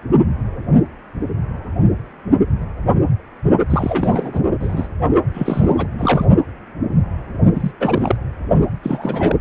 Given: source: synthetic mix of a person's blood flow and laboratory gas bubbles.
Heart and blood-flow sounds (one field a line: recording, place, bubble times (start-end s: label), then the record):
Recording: Doppler ultrasound of blood flow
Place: precordium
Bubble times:
3.70-4.39 s: bubbles
4.60-4.87 s: bubbles
5.33-5.87 s: bubbles
5.97-6.25 s: bubbles
7.54-7.71 s: bubbles
7.80-8.16 s: bubbles
8.83-9.36 s: bubbles
From the record:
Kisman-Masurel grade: 332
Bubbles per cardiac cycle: rolling drumbeat, 9 or more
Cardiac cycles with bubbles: 50 to 99%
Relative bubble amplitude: moderate (0.250 to 0.450)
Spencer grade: 3 (all of the cardiac periods contain showers or single bubble signals, but not dominating or overriding the cardiac motion signals)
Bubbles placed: only in the low amplitude regions of the cardiac cycle